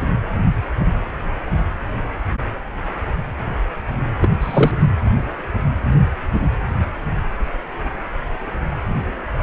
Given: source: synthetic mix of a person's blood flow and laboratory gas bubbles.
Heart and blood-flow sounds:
Doppler ultrasound of blood flow; precordium
4.21-4.29 s: bubbles
4.41-4.71 s: bubbles
From the record:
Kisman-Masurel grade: 213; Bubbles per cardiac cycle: several, 3 to 8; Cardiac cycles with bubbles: 1 to 10%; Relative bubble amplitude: loud (0.450 to 0.775); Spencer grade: 1 (occasional bubble signal discernible with the cardiac motion signal, with majority of cardiac periods free of bubbles); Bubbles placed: anywhere in the cardiac cycle

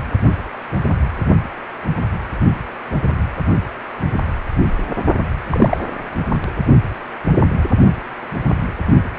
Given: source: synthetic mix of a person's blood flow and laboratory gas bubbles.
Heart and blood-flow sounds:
Doppler ultrasound of blood flow; precordium
5.50-5.77 s: bubbles
From the record:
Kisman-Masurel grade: 113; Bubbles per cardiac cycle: 1 to 2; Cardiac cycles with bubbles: 1 to 10%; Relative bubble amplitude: loud (0.450 to 0.775); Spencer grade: 1 (occasional bubble signal discernible with the cardiac motion signal, with majority of cardiac periods free of bubbles); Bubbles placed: only in the low amplitude regions of the cardiac cycle

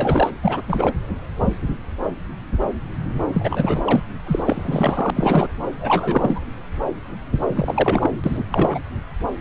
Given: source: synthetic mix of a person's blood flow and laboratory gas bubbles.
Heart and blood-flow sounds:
Doppler ultrasound of blood flow; subclavian vein
0.00-0.30 s: bubbles
0.43-0.61 s: bubbles
0.68-0.93 s: bubbles
3.34-3.83 s: bubbles
3.87-4.03 s: bubbles
4.26-5.10 s: bubbles
5.15-5.47 s: bubbles
5.82-6.42 s: bubbles
7.49-8.11 s: bubbles
8.24-8.45 s: bubbles
8.51-8.79 s: bubbles
From the record:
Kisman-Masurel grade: 332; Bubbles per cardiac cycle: rolling drumbeat, 9 or more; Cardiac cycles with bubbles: 50 to 99%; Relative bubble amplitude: moderate (0.250 to 0.450); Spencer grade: 3 (all of the cardiac periods contain showers or single bubble signals, but not dominating or overriding the cardiac motion signals); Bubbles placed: anywhere in the cardiac cycle

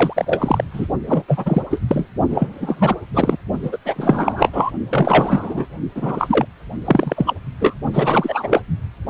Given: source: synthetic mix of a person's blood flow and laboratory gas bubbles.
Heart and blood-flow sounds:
Doppler ultrasound of blood flow; precordium
0.00-0.13 s: bubbles
0.16-0.64 s: bubbles
0.73-0.88 s: bubbles
1.06-1.23 s: bubbles
1.28-1.62 s: bubbles
1.71-1.79 s: bubbles
1.88-2.06 s: bubbles
2.29-2.94 s: bubbles
3.14-3.37 s: bubbles
3.62-3.78 s: bubbles
3.85-4.71 s: bubbles
4.91-5.66 s: bubbles
5.95-6.46 s: bubbles
6.84-7.34 s: bubbles
7.60-7.74 s: bubbles
7.93-8.61 s: bubbles
From the record:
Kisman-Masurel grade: 343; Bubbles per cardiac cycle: rolling drumbeat, 9 or more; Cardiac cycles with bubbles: 100%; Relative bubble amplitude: loud (0.450 to 0.775); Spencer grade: 3 (all of the cardiac periods contain showers or single bubble signals, but not dominating or overriding the cardiac motion signals); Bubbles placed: only in the low amplitude regions of the cardiac cycle

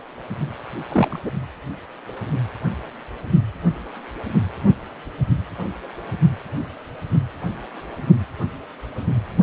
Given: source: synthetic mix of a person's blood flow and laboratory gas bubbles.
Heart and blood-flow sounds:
Doppler ultrasound of blood flow; precordium
0.89-1.20 s: bubbles
1.26-1.31 s: bubbles
From the record:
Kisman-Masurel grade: 123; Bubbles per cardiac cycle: 1 to 2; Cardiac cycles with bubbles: 10 to 50%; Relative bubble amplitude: loud (0.450 to 0.775); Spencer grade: 2 (many but less than half of the cardiac periods contain bubble signals, singularly or in groups); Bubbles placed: anywhere in the cardiac cycle

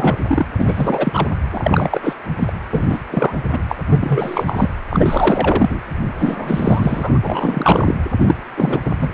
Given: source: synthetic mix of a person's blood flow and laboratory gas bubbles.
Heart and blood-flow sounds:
Doppler ultrasound of blood flow; precordium
0.00-0.17 s: bubbles
0.27-0.46 s: bubbles
0.57-1.27 s: bubbles
1.51-2.13 s: bubbles
2.38-2.53 s: bubbles
2.70-2.85 s: bubbles
2.89-2.99 s: bubbles
3.09-3.38 s: bubbles
3.51-3.62 s: bubbles
3.68-3.76 s: bubbles
3.88-4.69 s: bubbles
4.90-5.80 s: bubbles
6.19-7.19 s: bubbles
7.23-7.95 s: bubbles
8.18-8.35 s: bubbles
8.56-8.81 s: bubbles
8.85-8.90 s: bubbles
9.00-9.10 s: bubbles
From the record:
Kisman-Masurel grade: 333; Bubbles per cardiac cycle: rolling drumbeat, 9 or more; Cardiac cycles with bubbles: 50 to 99%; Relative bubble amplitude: loud (0.450 to 0.775); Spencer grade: 3 (all of the cardiac periods contain showers or single bubble signals, but not dominating or overriding the cardiac motion signals); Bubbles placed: anywhere in the cardiac cycle

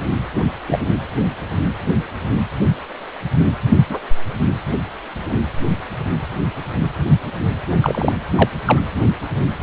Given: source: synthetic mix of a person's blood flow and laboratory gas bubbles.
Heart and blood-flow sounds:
Doppler ultrasound of blood flow; precordium
0.67-0.79 s: bubbles
3.68-3.78 s: bubbles
3.89-3.98 s: bubbles
7.80-8.12 s: bubbles
8.37-8.49 s: bubbles
8.65-8.82 s: bubbles
From the record:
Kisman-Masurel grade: 123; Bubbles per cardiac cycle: 1 to 2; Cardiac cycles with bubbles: 10 to 50%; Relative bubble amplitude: loud (0.450 to 0.775); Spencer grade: 2 (many but less than half of the cardiac periods contain bubble signals, singularly or in groups); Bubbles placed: anywhere in the cardiac cycle

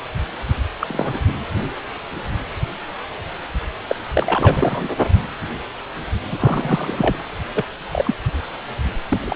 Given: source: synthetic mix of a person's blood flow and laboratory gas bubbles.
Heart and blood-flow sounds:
Doppler ultrasound of blood flow; precordium
0.80-1.20 s: bubbles
3.88-3.96 s: bubbles
4.14-4.89 s: bubbles
6.31-7.17 s: bubbles
7.54-7.65 s: bubbles
7.92-8.14 s: bubbles
9.09-9.36 s: bubbles
From the record:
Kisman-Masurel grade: 232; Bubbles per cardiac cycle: several, 3 to 8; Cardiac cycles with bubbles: 50 to 99%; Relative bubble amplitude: moderate (0.250 to 0.450); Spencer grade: 3 (all of the cardiac periods contain showers or single bubble signals, but not dominating or overriding the cardiac motion signals); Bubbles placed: anywhere in the cardiac cycle

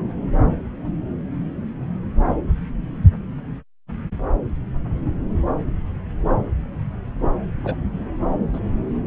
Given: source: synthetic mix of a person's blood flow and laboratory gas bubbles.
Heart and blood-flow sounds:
Doppler ultrasound of blood flow; subclavian vein
7.64-7.76 s: bubbles
8.53-8.60 s: bubbles
From the record:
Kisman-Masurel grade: 112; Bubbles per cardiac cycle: 1 to 2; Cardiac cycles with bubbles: 1 to 10%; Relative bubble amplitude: moderate (0.250 to 0.450); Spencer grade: 1 (occasional bubble signal discernible with the cardiac motion signal, with majority of cardiac periods free of bubbles); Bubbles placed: anywhere in the cardiac cycle

